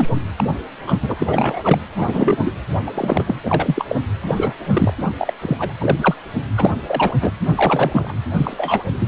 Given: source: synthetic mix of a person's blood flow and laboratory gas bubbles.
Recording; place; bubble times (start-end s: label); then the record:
Doppler ultrasound of blood flow; precordium
0.00-0.08 s: bubbles
0.38-0.44 s: bubbles
0.87-0.99 s: bubbles
1.02-1.14 s: bubbles
1.19-1.80 s: bubbles
1.95-2.38 s: bubbles
2.44-2.54 s: bubbles
2.87-2.92 s: bubbles
2.95-3.36 s: bubbles
3.43-3.85 s: bubbles
3.89-4.01 s: bubbles
4.27-4.56 s: bubbles
4.65-4.94 s: bubbles
5.01-5.12 s: bubbles
5.18-5.33 s: bubbles
5.41-5.74 s: bubbles
5.80-6.15 s: bubbles
6.57-6.71 s: bubbles
6.87-7.15 s: bubbles
7.21-7.32 s: bubbles
7.54-8.14 s: bubbles
8.34-8.83 s: bubbles
9.00-9.08 s: bubbles
From the record:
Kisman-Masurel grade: 233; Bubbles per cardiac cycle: several, 3 to 8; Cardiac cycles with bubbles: 50 to 99%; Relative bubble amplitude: loud (0.450 to 0.775); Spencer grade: 3 (all of the cardiac periods contain showers or single bubble signals, but not dominating or overriding the cardiac motion signals); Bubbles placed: anywhere in the cardiac cycle